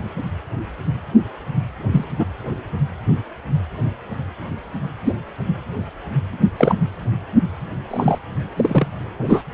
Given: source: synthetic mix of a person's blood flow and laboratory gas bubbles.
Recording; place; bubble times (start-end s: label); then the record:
Doppler ultrasound of blood flow; precordium
1.92-2.04 s: bubbles
2.19-2.25 s: bubbles
5.06-5.14 s: bubbles
6.57-6.76 s: bubbles
7.90-8.18 s: bubbles
8.56-8.87 s: bubbles
9.18-9.43 s: bubbles
From the record:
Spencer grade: 2 (many but less than half of the cardiac periods contain bubble signals, singularly or in groups); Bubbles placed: anywhere in the cardiac cycle